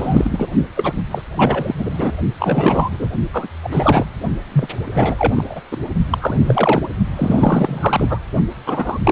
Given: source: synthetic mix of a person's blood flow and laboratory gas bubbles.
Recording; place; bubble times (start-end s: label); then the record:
Doppler ultrasound of blood flow; precordium
0.00-0.47 s: bubbles
0.75-0.93 s: bubbles
1.11-1.22 s: bubbles
1.36-1.76 s: bubbles
1.78-2.12 s: bubbles
2.40-3.08 s: bubbles
3.33-3.47 s: bubbles
3.63-4.06 s: bubbles
4.52-4.67 s: bubbles
4.94-5.62 s: bubbles
5.71-5.77 s: bubbles
6.11-6.87 s: bubbles
7.16-8.19 s: bubbles
8.66-8.99 s: bubbles
9.04-9.12 s: bubbles
From the record:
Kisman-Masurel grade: 343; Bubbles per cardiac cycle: rolling drumbeat, 9 or more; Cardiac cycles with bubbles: 100%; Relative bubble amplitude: loud (0.450 to 0.775); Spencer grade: 3 (all of the cardiac periods contain showers or single bubble signals, but not dominating or overriding the cardiac motion signals); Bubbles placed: only in the low amplitude regions of the cardiac cycle